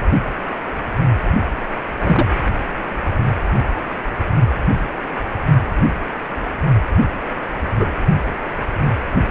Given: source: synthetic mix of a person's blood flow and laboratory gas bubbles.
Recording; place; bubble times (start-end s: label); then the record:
Doppler ultrasound of blood flow; precordium
2.03-2.26 s: bubbles
7.79-7.87 s: bubbles
8.80-8.90 s: bubbles
From the record:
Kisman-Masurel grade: 123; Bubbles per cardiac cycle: 1 to 2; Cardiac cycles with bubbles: 10 to 50%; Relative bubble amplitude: loud (0.450 to 0.775); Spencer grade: 2 (many but less than half of the cardiac periods contain bubble signals, singularly or in groups); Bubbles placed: only in the low amplitude regions of the cardiac cycle